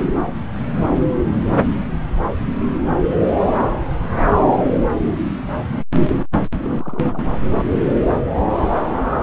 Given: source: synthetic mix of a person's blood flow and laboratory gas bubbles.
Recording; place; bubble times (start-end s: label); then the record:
Doppler ultrasound of blood flow; subclavian vein
6.62-7.25 s: bubbles
From the record:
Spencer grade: 1 (occasional bubble signal discernible with the cardiac motion signal, with majority of cardiac periods free of bubbles); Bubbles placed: anywhere in the cardiac cycle